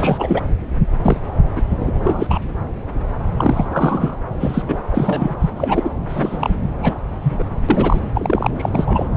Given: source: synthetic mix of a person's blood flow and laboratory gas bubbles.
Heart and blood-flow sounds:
Doppler ultrasound of blood flow; subclavian vein
0.00-0.42 s: bubbles
1.02-1.17 s: bubbles
1.56-1.62 s: bubbles
1.80-1.93 s: bubbles
1.99-2.42 s: bubbles
3.37-3.65 s: bubbles
3.72-4.20 s: bubbles
4.40-4.62 s: bubbles
4.68-4.78 s: bubbles
4.92-5.34 s: bubbles
5.40-5.50 s: bubbles
5.56-5.90 s: bubbles
6.09-6.55 s: bubbles
6.82-6.94 s: bubbles
7.22-7.43 s: bubbles
7.68-8.01 s: bubbles
8.13-8.51 s: bubbles
8.58-8.70 s: bubbles
8.75-9.09 s: bubbles
From the record:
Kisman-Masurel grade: 233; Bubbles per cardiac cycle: several, 3 to 8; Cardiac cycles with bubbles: 50 to 99%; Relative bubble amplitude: loud (0.450 to 0.775); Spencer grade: 3 (all of the cardiac periods contain showers or single bubble signals, but not dominating or overriding the cardiac motion signals); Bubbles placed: anywhere in the cardiac cycle

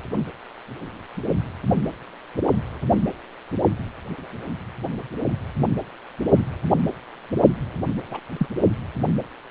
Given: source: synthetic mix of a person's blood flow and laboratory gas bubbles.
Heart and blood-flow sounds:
Doppler ultrasound of blood flow; precordium
7.96-8.02 s: bubbles
8.11-8.20 s: bubbles
8.38-8.47 s: bubbles
From the record:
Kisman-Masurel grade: 212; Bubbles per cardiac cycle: several, 3 to 8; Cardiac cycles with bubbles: 1 to 10%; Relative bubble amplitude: moderate (0.250 to 0.450); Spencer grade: 1 (occasional bubble signal discernible with the cardiac motion signal, with majority of cardiac periods free of bubbles); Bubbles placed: only in the low amplitude regions of the cardiac cycle

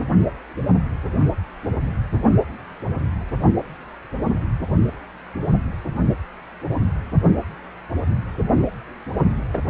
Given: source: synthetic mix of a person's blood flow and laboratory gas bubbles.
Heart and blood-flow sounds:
Doppler ultrasound of blood flow; precordium
9.54-9.58 s: bubbles
From the record:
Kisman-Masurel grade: 113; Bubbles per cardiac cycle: 1 to 2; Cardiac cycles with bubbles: 1 to 10%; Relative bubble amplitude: loud (0.450 to 0.775); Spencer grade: 1 (occasional bubble signal discernible with the cardiac motion signal, with majority of cardiac periods free of bubbles); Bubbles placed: only in the low amplitude regions of the cardiac cycle

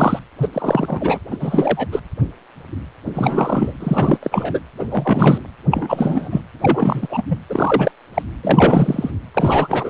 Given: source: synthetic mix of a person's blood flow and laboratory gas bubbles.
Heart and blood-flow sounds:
Doppler ultrasound of blood flow; precordium
0.00-0.19 s: bubbles
0.42-0.48 s: bubbles
0.53-1.20 s: bubbles
1.30-1.37 s: bubbles
1.40-1.88 s: bubbles
1.92-1.99 s: bubbles
3.14-3.73 s: bubbles
3.80-4.18 s: bubbles
4.22-4.59 s: bubbles
4.79-5.40 s: bubbles
5.71-6.42 s: bubbles
6.62-7.23 s: bubbles
7.29-7.38 s: bubbles
7.49-7.92 s: bubbles
8.14-8.22 s: bubbles
8.43-9.11 s: bubbles
9.35-9.90 s: bubbles
From the record:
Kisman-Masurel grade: 333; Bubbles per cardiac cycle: rolling drumbeat, 9 or more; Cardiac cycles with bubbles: 50 to 99%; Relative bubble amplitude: loud (0.450 to 0.775); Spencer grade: 3 (all of the cardiac periods contain showers or single bubble signals, but not dominating or overriding the cardiac motion signals); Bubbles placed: anywhere in the cardiac cycle

